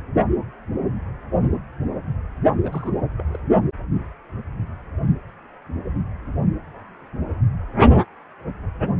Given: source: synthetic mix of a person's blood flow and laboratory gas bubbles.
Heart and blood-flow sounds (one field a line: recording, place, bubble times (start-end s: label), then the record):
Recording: Doppler ultrasound of blood flow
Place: precordium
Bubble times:
2.64-2.92 s: bubbles
3.17-3.25 s: bubbles
3.30-3.39 s: bubbles
From the record:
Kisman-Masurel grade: 211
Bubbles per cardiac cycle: several, 3 to 8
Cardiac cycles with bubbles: 1 to 10%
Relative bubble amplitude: barely perceptible (0.100 to 0.250)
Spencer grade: 1 (occasional bubble signal discernible with the cardiac motion signal, with majority of cardiac periods free of bubbles)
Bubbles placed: only in the low amplitude regions of the cardiac cycle